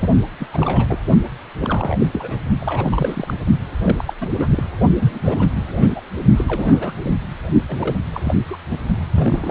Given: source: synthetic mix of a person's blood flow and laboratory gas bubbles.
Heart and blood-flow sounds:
Doppler ultrasound of blood flow; precordium
0.00-0.07 s: bubbles
0.39-0.47 s: bubbles
0.52-0.98 s: bubbles
1.60-2.08 s: bubbles
2.12-2.42 s: bubbles
2.60-3.35 s: bubbles
3.81-4.13 s: bubbles
4.21-4.35 s: bubbles
4.39-4.63 s: bubbles
5.01-5.50 s: bubbles
5.79-5.88 s: bubbles
5.96-6.00 s: bubbles
6.36-6.44 s: bubbles
6.47-6.93 s: bubbles
7.02-7.14 s: bubbles
7.68-7.96 s: bubbles
8.12-8.36 s: bubbles
8.47-8.56 s: bubbles
8.70-8.83 s: bubbles
9.13-9.50 s: bubbles
From the record:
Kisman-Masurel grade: 342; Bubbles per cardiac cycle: rolling drumbeat, 9 or more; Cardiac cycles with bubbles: 100%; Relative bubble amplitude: moderate (0.250 to 0.450); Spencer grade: 3 (all of the cardiac periods contain showers or single bubble signals, but not dominating or overriding the cardiac motion signals); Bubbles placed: only in the low amplitude regions of the cardiac cycle

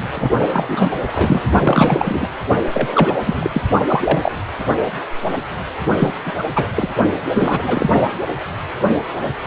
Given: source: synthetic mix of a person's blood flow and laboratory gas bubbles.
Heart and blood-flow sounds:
Doppler ultrasound of blood flow; precordium
0.15-0.30 s: bubbles
0.53-0.91 s: bubbles
1.07-1.42 s: bubbles
1.63-2.27 s: bubbles
2.73-3.14 s: bubbles
3.25-3.50 s: bubbles
3.54-3.62 s: bubbles
3.87-4.32 s: bubbles
5.99-6.13 s: bubbles
6.25-6.33 s: bubbles
6.38-6.44 s: bubbles
6.54-6.67 s: bubbles
6.75-6.88 s: bubbles
7.34-8.02 s: bubbles
From the record:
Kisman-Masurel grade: 233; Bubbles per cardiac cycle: several, 3 to 8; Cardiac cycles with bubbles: 50 to 99%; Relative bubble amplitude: loud (0.450 to 0.775); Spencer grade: 3 (all of the cardiac periods contain showers or single bubble signals, but not dominating or overriding the cardiac motion signals); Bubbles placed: only in the low amplitude regions of the cardiac cycle

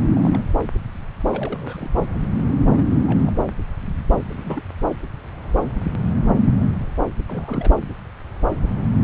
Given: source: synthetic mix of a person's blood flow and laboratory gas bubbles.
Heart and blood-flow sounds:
Doppler ultrasound of blood flow; subclavian vein
0.15-0.43 s: bubbles
1.30-1.90 s: bubbles
2.77-3.33 s: bubbles
4.21-4.63 s: bubbles
7.28-7.71 s: bubbles
From the record:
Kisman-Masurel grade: 221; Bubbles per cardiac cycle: several, 3 to 8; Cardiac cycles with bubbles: 10 to 50%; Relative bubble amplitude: barely perceptible (0.100 to 0.250); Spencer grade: 2 (many but less than half of the cardiac periods contain bubble signals, singularly or in groups); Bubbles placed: anywhere in the cardiac cycle

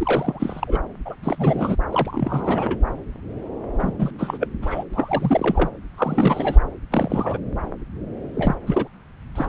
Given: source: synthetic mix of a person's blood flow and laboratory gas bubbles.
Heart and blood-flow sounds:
Doppler ultrasound of blood flow; subclavian vein
0.00-0.81 s: bubbles
1.05-1.15 s: bubbles
1.23-1.76 s: bubbles
1.91-2.79 s: bubbles
3.78-3.93 s: bubbles
3.98-4.11 s: bubbles
4.18-4.48 s: bubbles
4.62-4.83 s: bubbles
4.93-5.70 s: bubbles
5.97-6.59 s: bubbles
6.90-7.38 s: bubbles
8.35-8.55 s: bubbles
8.67-8.88 s: bubbles
9.35-9.49 s: bubbles
From the record:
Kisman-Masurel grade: 332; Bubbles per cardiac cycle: rolling drumbeat, 9 or more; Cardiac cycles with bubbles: 50 to 99%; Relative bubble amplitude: moderate (0.250 to 0.450); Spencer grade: 3 (all of the cardiac periods contain showers or single bubble signals, but not dominating or overriding the cardiac motion signals); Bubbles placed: anywhere in the cardiac cycle

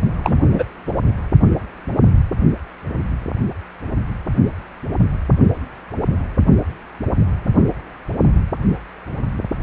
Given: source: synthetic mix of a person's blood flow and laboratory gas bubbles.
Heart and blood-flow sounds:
Doppler ultrasound of blood flow; precordium
0.22-0.42 s: bubbles
0.51-0.64 s: bubbles
0.87-0.94 s: bubbles
From the record:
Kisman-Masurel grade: 212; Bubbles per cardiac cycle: several, 3 to 8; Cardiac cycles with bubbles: 1 to 10%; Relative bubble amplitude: moderate (0.250 to 0.450); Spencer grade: 1 (occasional bubble signal discernible with the cardiac motion signal, with majority of cardiac periods free of bubbles); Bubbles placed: only in the low amplitude regions of the cardiac cycle

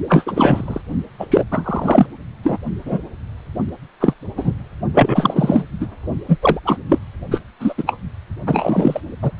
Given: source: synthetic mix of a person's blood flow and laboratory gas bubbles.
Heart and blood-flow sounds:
Doppler ultrasound of blood flow; precordium
0.09-0.81 s: bubbles
1.19-1.27 s: bubbles
1.30-1.45 s: bubbles
1.51-2.06 s: bubbles
2.43-2.57 s: bubbles
2.85-2.98 s: bubbles
4.00-4.13 s: bubbles
4.37-4.52 s: bubbles
4.94-5.62 s: bubbles
5.80-5.87 s: bubbles
6.29-6.38 s: bubbles
6.42-6.59 s: bubbles
6.65-6.78 s: bubbles
6.89-6.99 s: bubbles
7.30-7.41 s: bubbles
7.59-7.74 s: bubbles
7.78-7.84 s: bubbles
7.87-7.97 s: bubbles
8.46-9.01 s: bubbles
9.22-9.31 s: bubbles
From the record:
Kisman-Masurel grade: 243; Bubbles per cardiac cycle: several, 3 to 8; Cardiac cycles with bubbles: 100%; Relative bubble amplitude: loud (0.450 to 0.775); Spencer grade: 3 (all of the cardiac periods contain showers or single bubble signals, but not dominating or overriding the cardiac motion signals); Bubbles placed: only in the low amplitude regions of the cardiac cycle

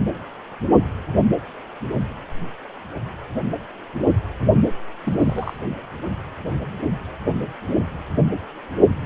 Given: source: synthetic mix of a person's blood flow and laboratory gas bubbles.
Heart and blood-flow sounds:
Doppler ultrasound of blood flow; precordium
5.04-5.57 s: bubbles
From the record:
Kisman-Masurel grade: 211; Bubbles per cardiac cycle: several, 3 to 8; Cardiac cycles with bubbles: 1 to 10%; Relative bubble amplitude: barely perceptible (0.100 to 0.250); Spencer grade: 1 (occasional bubble signal discernible with the cardiac motion signal, with majority of cardiac periods free of bubbles); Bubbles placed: only in the low amplitude regions of the cardiac cycle

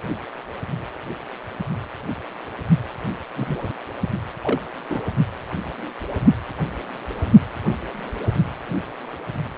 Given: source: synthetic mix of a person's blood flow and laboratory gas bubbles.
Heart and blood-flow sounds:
Doppler ultrasound of blood flow; precordium
3.36-3.59 s: bubbles
4.42-4.61 s: bubbles
4.90-5.02 s: bubbles
From the record:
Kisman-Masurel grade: 121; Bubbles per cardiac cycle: 1 to 2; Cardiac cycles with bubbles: 10 to 50%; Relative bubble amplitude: barely perceptible (0.100 to 0.250); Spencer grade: 2 (many but less than half of the cardiac periods contain bubble signals, singularly or in groups); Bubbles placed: only in the low amplitude regions of the cardiac cycle

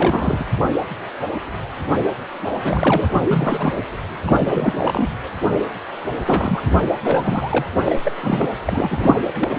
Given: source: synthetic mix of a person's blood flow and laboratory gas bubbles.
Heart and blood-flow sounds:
Doppler ultrasound of blood flow; precordium
0.00-0.45 s: bubbles
2.64-3.10 s: bubbles
3.14-3.19 s: bubbles
3.27-3.73 s: bubbles
4.24-5.09 s: bubbles
6.25-6.62 s: bubbles
6.66-6.76 s: bubbles
7.04-7.66 s: bubbles
7.84-7.99 s: bubbles
8.04-8.12 s: bubbles
8.22-8.49 s: bubbles
8.65-9.16 s: bubbles
9.36-9.57 s: bubbles
From the record:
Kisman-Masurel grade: 333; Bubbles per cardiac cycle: rolling drumbeat, 9 or more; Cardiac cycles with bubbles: 50 to 99%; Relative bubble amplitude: loud (0.450 to 0.775); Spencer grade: 3 (all of the cardiac periods contain showers or single bubble signals, but not dominating or overriding the cardiac motion signals); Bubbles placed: anywhere in the cardiac cycle

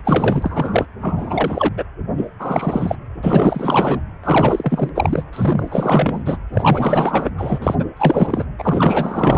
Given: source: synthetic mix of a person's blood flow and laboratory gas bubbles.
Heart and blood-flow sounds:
Doppler ultrasound of blood flow; precordium
0.04-0.85 s: bubbles
1.01-1.69 s: bubbles
1.77-1.83 s: bubbles
2.18-2.28 s: bubbles
2.39-2.96 s: bubbles
3.23-4.00 s: bubbles
4.24-4.90 s: bubbles
4.95-5.23 s: bubbles
5.33-6.37 s: bubbles
6.54-7.30 s: bubbles
7.37-7.59 s: bubbles
7.62-7.75 s: bubbles
7.79-7.85 s: bubbles
7.96-8.46 s: bubbles
8.58-9.38 s: bubbles
From the record:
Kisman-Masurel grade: 444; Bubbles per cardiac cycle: continuous sound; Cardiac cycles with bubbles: 100%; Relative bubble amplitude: maximal (0.775 to 0.999); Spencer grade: 4 (maximum detectable bubble signal sounding continuously throughout systole and diastole of every cardiac period, and overriding the amplitude of the normal cardiac signals); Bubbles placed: anywhere in the cardiac cycle

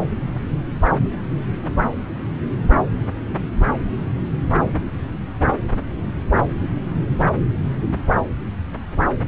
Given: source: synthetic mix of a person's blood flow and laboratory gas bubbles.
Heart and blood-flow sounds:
Doppler ultrasound of blood flow; subclavian vein
no bubbles
From the record:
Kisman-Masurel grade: 000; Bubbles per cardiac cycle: 0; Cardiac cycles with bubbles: 0%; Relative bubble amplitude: no bubbles discernible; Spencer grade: 0 (complete lack of bubble signals)

